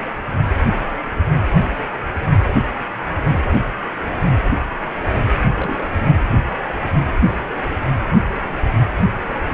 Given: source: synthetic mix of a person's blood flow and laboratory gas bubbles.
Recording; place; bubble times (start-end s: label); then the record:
Doppler ultrasound of blood flow; precordium
5.54-5.86 s: bubbles
5.92-6.08 s: bubbles
From the record:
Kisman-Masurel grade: 211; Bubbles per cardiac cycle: several, 3 to 8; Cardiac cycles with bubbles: 1 to 10%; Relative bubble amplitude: barely perceptible (0.100 to 0.250); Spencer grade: 1 (occasional bubble signal discernible with the cardiac motion signal, with majority of cardiac periods free of bubbles); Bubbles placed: anywhere in the cardiac cycle